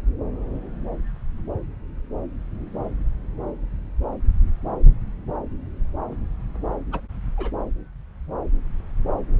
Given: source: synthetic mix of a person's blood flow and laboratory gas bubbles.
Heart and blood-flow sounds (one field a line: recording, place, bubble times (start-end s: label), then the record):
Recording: Doppler ultrasound of blood flow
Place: subclavian vein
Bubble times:
6.92-7.01 s: bubbles
7.37-7.51 s: bubbles
From the record:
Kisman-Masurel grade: 111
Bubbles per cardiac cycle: 1 to 2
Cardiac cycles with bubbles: 1 to 10%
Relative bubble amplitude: barely perceptible (0.100 to 0.250)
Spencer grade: 1 (occasional bubble signal discernible with the cardiac motion signal, with majority of cardiac periods free of bubbles)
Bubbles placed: anywhere in the cardiac cycle